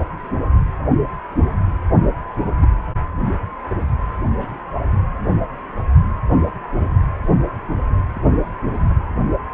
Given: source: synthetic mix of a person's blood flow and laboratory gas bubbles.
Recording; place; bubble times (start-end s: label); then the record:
Doppler ultrasound of blood flow; precordium
2.61-2.67 s: bubbles
4.38-4.58 s: bubbles
6.46-6.50 s: bubbles
8.14-8.20 s: bubbles
8.73-8.79 s: bubbles
From the record:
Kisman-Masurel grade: 121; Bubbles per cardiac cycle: 1 to 2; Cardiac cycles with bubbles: 10 to 50%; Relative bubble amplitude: barely perceptible (0.100 to 0.250); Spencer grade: 2 (many but less than half of the cardiac periods contain bubble signals, singularly or in groups); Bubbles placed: anywhere in the cardiac cycle